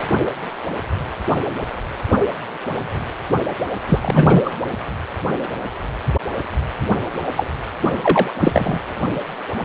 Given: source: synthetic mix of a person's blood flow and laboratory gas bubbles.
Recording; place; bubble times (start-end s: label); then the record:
Doppler ultrasound of blood flow; precordium
3.86-4.53 s: bubbles
7.37-7.47 s: bubbles
8.02-8.31 s: bubbles
8.39-8.79 s: bubbles
From the record:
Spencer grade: 2 (many but less than half of the cardiac periods contain bubble signals, singularly or in groups); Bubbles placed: anywhere in the cardiac cycle